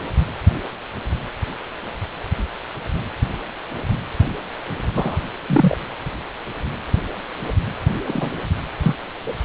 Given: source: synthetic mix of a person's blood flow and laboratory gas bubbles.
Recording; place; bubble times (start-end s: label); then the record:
Doppler ultrasound of blood flow; precordium
4.94-5.17 s: bubbles
5.48-5.75 s: bubbles
8.05-8.32 s: bubbles
8.82-8.95 s: bubbles
9.26-9.34 s: bubbles
From the record:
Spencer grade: 2 (many but less than half of the cardiac periods contain bubble signals, singularly or in groups); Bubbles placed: anywhere in the cardiac cycle